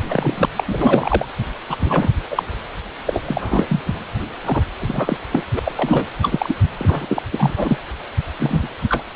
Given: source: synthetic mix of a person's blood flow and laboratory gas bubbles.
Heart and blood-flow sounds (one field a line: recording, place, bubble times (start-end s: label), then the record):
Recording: Doppler ultrasound of blood flow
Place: precordium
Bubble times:
0.09-0.46 s: bubbles
0.56-0.64 s: bubbles
0.68-1.26 s: bubbles
1.70-1.77 s: bubbles
1.80-2.12 s: bubbles
2.30-2.43 s: bubbles
3.05-3.80 s: bubbles
3.85-3.95 s: bubbles
4.45-4.63 s: bubbles
4.80-5.17 s: bubbles
5.31-5.43 s: bubbles
5.52-5.59 s: bubbles
5.64-5.72 s: bubbles
5.76-6.05 s: bubbles
6.21-6.55 s: bubbles
6.79-7.22 s: bubbles
7.31-7.78 s: bubbles
8.39-8.69 s: bubbles
8.89-9.04 s: bubbles
From the record:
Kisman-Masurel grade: 343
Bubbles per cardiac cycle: rolling drumbeat, 9 or more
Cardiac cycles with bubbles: 100%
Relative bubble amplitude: loud (0.450 to 0.775)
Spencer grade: 3 (all of the cardiac periods contain showers or single bubble signals, but not dominating or overriding the cardiac motion signals)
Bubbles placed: anywhere in the cardiac cycle